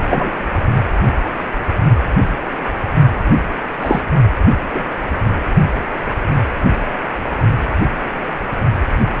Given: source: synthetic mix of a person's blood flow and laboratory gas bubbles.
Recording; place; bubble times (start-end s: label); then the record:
Doppler ultrasound of blood flow; precordium
0.10-0.30 s: bubbles
3.81-4.02 s: bubbles
4.74-4.84 s: bubbles
From the record:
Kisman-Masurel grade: 123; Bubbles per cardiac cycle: 1 to 2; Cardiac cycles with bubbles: 10 to 50%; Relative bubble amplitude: loud (0.450 to 0.775); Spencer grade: 2 (many but less than half of the cardiac periods contain bubble signals, singularly or in groups); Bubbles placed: only in the low amplitude regions of the cardiac cycle